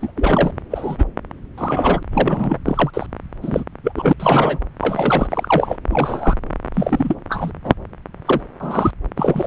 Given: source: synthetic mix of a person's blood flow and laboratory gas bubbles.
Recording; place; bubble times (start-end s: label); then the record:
Doppler ultrasound of blood flow; subclavian vein
0.00-0.11 s: bubbles
0.16-0.51 s: bubbles
0.70-1.04 s: bubbles
1.57-2.03 s: bubbles
2.11-2.58 s: bubbles
2.65-2.91 s: bubbles
2.94-3.06 s: bubbles
3.42-3.64 s: bubbles
3.83-3.92 s: bubbles
3.96-4.13 s: bubbles
4.19-4.59 s: bubbles
4.81-5.77 s: bubbles
5.89-6.35 s: bubbles
6.74-7.14 s: bubbles
7.29-7.52 s: bubbles
7.63-7.74 s: bubbles
8.25-8.41 s: bubbles
8.60-8.92 s: bubbles
9.17-9.47 s: bubbles
From the record:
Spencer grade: 3 (all of the cardiac periods contain showers or single bubble signals, but not dominating or overriding the cardiac motion signals); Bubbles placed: anywhere in the cardiac cycle